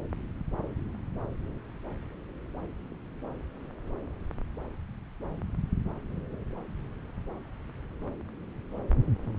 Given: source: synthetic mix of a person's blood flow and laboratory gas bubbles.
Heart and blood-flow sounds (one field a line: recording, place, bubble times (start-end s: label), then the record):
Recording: Doppler ultrasound of blood flow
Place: subclavian vein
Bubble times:
no bubbles
From the record:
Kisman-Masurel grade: 000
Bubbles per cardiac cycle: 0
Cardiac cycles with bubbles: 0%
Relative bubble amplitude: no bubbles discernible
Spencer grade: 0 (complete lack of bubble signals)